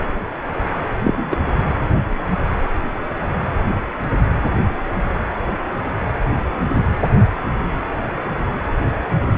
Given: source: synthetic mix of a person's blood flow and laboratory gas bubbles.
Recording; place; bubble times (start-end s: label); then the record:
Doppler ultrasound of blood flow; precordium
1.04-1.36 s: bubbles
From the record:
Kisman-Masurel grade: 212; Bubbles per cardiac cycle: several, 3 to 8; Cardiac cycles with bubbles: 1 to 10%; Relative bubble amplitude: moderate (0.250 to 0.450); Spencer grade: 1 (occasional bubble signal discernible with the cardiac motion signal, with majority of cardiac periods free of bubbles); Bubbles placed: anywhere in the cardiac cycle